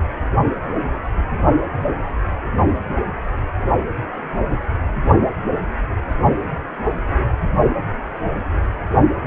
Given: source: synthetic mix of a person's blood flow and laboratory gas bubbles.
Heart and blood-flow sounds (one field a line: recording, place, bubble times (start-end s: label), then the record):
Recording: Doppler ultrasound of blood flow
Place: precordium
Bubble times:
no bubbles
From the record:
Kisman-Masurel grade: 000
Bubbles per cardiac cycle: 0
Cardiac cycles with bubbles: 0%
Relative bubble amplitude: no bubbles discernible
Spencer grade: 0 (complete lack of bubble signals)